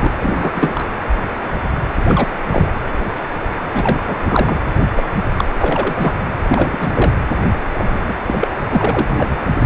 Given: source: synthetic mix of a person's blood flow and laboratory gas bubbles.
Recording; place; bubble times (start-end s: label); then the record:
Doppler ultrasound of blood flow; precordium
0.00-0.13 s: bubbles
0.21-0.87 s: bubbles
2.06-2.29 s: bubbles
2.47-2.72 s: bubbles
3.74-4.00 s: bubbles
4.06-4.17 s: bubbles
4.25-4.56 s: bubbles
4.96-5.06 s: bubbles
5.37-5.44 s: bubbles
5.54-6.13 s: bubbles
6.48-7.12 s: bubbles
7.78-8.01 s: bubbles
8.07-8.14 s: bubbles
8.27-8.54 s: bubbles
8.70-9.38 s: bubbles
From the record:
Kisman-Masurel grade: 232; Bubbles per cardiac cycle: several, 3 to 8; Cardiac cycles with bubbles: 50 to 99%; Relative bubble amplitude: moderate (0.250 to 0.450); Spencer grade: 3 (all of the cardiac periods contain showers or single bubble signals, but not dominating or overriding the cardiac motion signals); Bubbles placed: anywhere in the cardiac cycle